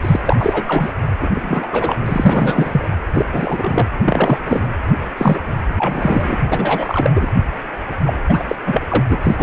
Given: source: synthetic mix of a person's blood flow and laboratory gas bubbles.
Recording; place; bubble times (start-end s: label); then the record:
Doppler ultrasound of blood flow; precordium
0.01-0.20 s: bubbles
0.25-0.36 s: bubbles
0.39-0.92 s: bubbles
1.20-1.29 s: bubbles
1.32-1.67 s: bubbles
1.72-1.96 s: bubbles
2.05-2.89 s: bubbles
3.14-3.26 s: bubbles
3.31-3.88 s: bubbles
4.05-4.42 s: bubbles
4.45-4.67 s: bubbles
5.17-5.39 s: bubbles
5.78-6.37 s: bubbles
6.45-7.11 s: bubbles
7.15-7.30 s: bubbles
8.04-8.13 s: bubbles
8.29-8.44 s: bubbles
8.48-8.55 s: bubbles
8.66-8.81 s: bubbles
8.88-9.02 s: bubbles
9.09-9.19 s: bubbles
9.21-9.43 s: bubbles
From the record:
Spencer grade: 3 (all of the cardiac periods contain showers or single bubble signals, but not dominating or overriding the cardiac motion signals); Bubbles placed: anywhere in the cardiac cycle